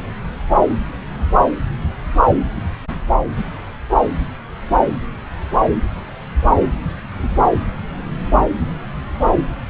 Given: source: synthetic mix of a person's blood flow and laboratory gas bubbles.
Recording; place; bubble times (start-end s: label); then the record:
Doppler ultrasound of blood flow; subclavian vein
no bubbles
From the record:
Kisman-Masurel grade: 000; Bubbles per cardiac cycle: 0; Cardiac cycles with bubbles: 0%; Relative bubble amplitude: no bubbles discernible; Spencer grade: 0 (complete lack of bubble signals)